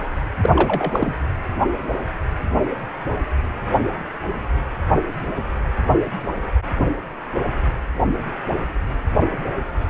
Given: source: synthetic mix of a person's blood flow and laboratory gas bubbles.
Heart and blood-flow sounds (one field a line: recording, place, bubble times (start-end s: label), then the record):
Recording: Doppler ultrasound of blood flow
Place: precordium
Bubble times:
0.42-0.50 s: bubbles
0.55-1.16 s: bubbles
From the record:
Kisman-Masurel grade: 213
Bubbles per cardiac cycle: several, 3 to 8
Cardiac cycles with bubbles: 1 to 10%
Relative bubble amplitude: loud (0.450 to 0.775)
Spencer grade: 1 (occasional bubble signal discernible with the cardiac motion signal, with majority of cardiac periods free of bubbles)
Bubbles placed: anywhere in the cardiac cycle